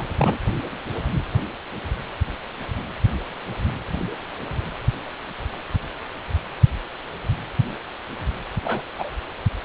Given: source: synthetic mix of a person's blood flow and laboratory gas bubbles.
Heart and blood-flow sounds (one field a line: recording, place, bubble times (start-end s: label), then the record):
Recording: Doppler ultrasound of blood flow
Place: precordium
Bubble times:
0.00-0.07 s: bubbles
0.18-0.38 s: bubbles
8.60-8.81 s: bubbles
8.98-9.10 s: bubbles
From the record:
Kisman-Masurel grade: 222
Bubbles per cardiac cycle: several, 3 to 8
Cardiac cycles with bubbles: 10 to 50%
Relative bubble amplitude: moderate (0.250 to 0.450)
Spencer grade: 2 (many but less than half of the cardiac periods contain bubble signals, singularly or in groups)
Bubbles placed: anywhere in the cardiac cycle